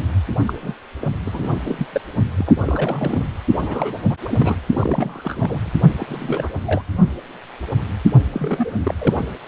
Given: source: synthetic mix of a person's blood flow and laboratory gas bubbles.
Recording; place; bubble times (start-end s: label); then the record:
Doppler ultrasound of blood flow; precordium
0.47-0.53 s: bubbles
0.60-0.74 s: bubbles
1.01-1.08 s: bubbles
1.25-1.59 s: bubbles
1.65-1.87 s: bubbles
1.93-2.01 s: bubbles
2.35-2.54 s: bubbles
2.60-3.28 s: bubbles
3.60-3.96 s: bubbles
4.09-4.16 s: bubbles
4.25-4.55 s: bubbles
4.71-5.72 s: bubbles
5.97-6.50 s: bubbles
6.65-6.83 s: bubbles
8.32-8.71 s: bubbles
8.83-8.95 s: bubbles
8.99-9.25 s: bubbles
From the record:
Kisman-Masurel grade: 332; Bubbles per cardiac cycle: rolling drumbeat, 9 or more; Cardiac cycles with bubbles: 50 to 99%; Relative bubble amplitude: moderate (0.250 to 0.450); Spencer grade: 3 (all of the cardiac periods contain showers or single bubble signals, but not dominating or overriding the cardiac motion signals); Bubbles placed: only in the low amplitude regions of the cardiac cycle